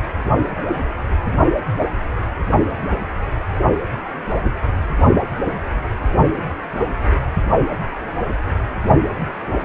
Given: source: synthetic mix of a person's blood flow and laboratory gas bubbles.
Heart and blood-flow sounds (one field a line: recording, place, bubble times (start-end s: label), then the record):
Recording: Doppler ultrasound of blood flow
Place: precordium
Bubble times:
no bubbles
From the record:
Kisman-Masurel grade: 000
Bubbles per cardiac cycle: 0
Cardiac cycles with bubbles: 0%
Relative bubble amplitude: no bubbles discernible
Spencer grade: 0 (complete lack of bubble signals)